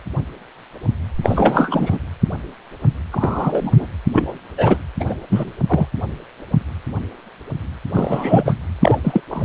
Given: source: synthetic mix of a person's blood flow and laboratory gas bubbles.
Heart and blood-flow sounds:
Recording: Doppler ultrasound of blood flow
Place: precordium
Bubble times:
1.23-1.98 s: bubbles
3.12-3.87 s: bubbles
4.13-4.40 s: bubbles
4.58-4.76 s: bubbles
5.00-5.15 s: bubbles
5.29-5.51 s: bubbles
5.67-5.88 s: bubbles
7.93-8.54 s: bubbles
8.82-8.98 s: bubbles
9.03-9.21 s: bubbles
9.30-9.45 s: bubbles
From the record:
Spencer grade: 3 (all of the cardiac periods contain showers or single bubble signals, but not dominating or overriding the cardiac motion signals)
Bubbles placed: anywhere in the cardiac cycle

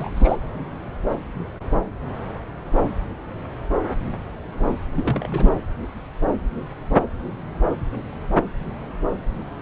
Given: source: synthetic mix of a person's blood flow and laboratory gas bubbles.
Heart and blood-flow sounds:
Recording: Doppler ultrasound of blood flow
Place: subclavian vein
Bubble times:
0.00-0.36 s: bubbles
4.95-5.51 s: bubbles
From the record:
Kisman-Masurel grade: 221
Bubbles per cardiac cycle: several, 3 to 8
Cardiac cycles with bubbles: 10 to 50%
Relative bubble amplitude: barely perceptible (0.100 to 0.250)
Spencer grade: 2 (many but less than half of the cardiac periods contain bubble signals, singularly or in groups)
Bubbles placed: anywhere in the cardiac cycle

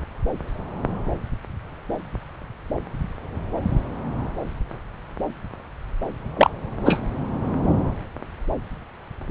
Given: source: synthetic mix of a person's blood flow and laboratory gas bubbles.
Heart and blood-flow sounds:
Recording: Doppler ultrasound of blood flow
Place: subclavian vein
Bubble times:
6.36-6.50 s: bubbles
6.85-7.00 s: bubbles
From the record:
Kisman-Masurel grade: 113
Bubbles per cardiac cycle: 1 to 2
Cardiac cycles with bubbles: 1 to 10%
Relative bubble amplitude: loud (0.450 to 0.775)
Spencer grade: 1 (occasional bubble signal discernible with the cardiac motion signal, with majority of cardiac periods free of bubbles)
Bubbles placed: anywhere in the cardiac cycle

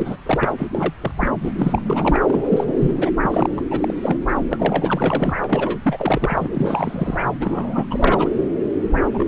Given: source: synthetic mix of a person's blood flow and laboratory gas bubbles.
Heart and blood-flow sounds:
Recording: Doppler ultrasound of blood flow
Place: subclavian vein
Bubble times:
0.00-0.16 s: bubbles
0.26-0.53 s: bubbles
0.57-0.67 s: bubbles
0.74-0.94 s: bubbles
1.01-1.11 s: bubbles
1.20-1.31 s: bubbles
1.41-2.21 s: bubbles
2.27-3.10 s: bubbles
3.22-3.64 s: bubbles
3.70-3.94 s: bubbles
4.02-4.16 s: bubbles
4.49-5.34 s: bubbles
5.40-5.80 s: bubbles
5.82-6.49 s: bubbles
6.54-7.25 s: bubbles
7.40-7.86 s: bubbles
7.90-8.29 s: bubbles
9.14-9.27 s: bubbles
From the record:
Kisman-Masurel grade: 342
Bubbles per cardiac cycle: rolling drumbeat, 9 or more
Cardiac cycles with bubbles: 100%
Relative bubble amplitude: moderate (0.250 to 0.450)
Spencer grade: 3 (all of the cardiac periods contain showers or single bubble signals, but not dominating or overriding the cardiac motion signals)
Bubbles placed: anywhere in the cardiac cycle

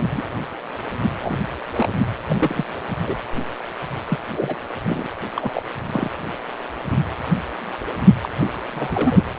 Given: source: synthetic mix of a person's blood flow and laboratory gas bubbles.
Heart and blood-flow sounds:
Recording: Doppler ultrasound of blood flow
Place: precordium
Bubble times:
0.00-0.22 s: bubbles
1.03-1.10 s: bubbles
1.23-1.38 s: bubbles
1.75-1.87 s: bubbles
2.29-2.65 s: bubbles
3.05-3.17 s: bubbles
4.08-4.19 s: bubbles
4.36-4.56 s: bubbles
4.86-5.07 s: bubbles
5.36-5.62 s: bubbles
5.90-6.11 s: bubbles
8.22-8.29 s: bubbles
8.40-8.47 s: bubbles
8.74-9.22 s: bubbles
From the record:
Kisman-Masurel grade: 232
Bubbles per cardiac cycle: several, 3 to 8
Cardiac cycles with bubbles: 50 to 99%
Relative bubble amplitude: moderate (0.250 to 0.450)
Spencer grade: 3 (all of the cardiac periods contain showers or single bubble signals, but not dominating or overriding the cardiac motion signals)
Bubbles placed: anywhere in the cardiac cycle

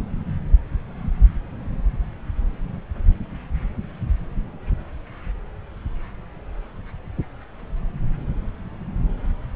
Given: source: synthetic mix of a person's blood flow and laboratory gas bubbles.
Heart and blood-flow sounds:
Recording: Doppler ultrasound of blood flow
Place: subclavian vein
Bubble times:
no bubbles
From the record:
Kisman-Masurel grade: 000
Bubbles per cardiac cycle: 0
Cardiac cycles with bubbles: 0%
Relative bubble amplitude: no bubbles discernible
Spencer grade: 0 (complete lack of bubble signals)

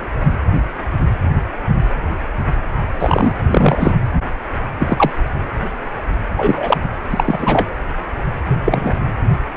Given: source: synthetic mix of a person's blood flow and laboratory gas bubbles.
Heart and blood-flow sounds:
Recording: Doppler ultrasound of blood flow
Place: precordium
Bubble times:
2.98-3.33 s: bubbles
3.50-3.94 s: bubbles
4.79-5.10 s: bubbles
6.37-6.77 s: bubbles
6.83-6.89 s: bubbles
7.08-7.68 s: bubbles
8.47-8.94 s: bubbles
From the record:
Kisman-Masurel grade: 223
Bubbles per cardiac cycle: several, 3 to 8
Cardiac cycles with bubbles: 10 to 50%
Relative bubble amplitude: loud (0.450 to 0.775)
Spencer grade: 2 (many but less than half of the cardiac periods contain bubble signals, singularly or in groups)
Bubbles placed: anywhere in the cardiac cycle

